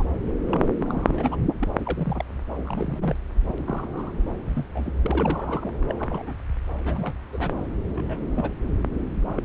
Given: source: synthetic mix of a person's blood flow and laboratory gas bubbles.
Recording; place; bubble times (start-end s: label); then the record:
Doppler ultrasound of blood flow; subclavian vein
0.00-0.07 s: bubbles
0.47-0.69 s: bubbles
0.77-1.37 s: bubbles
1.59-1.69 s: bubbles
1.79-2.25 s: bubbles
2.48-3.16 s: bubbles
3.34-3.55 s: bubbles
3.58-4.12 s: bubbles
4.49-4.64 s: bubbles
4.74-4.92 s: bubbles
5.02-5.72 s: bubbles
5.87-5.96 s: bubbles
5.99-6.33 s: bubbles
6.85-7.17 s: bubbles
7.32-7.64 s: bubbles
7.95-8.20 s: bubbles
8.35-8.51 s: bubbles
9.22-9.43 s: bubbles
From the record:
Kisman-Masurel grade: 242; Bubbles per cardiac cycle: several, 3 to 8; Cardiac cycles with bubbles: 100%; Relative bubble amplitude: moderate (0.250 to 0.450); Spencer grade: 3 (all of the cardiac periods contain showers or single bubble signals, but not dominating or overriding the cardiac motion signals); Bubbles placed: anywhere in the cardiac cycle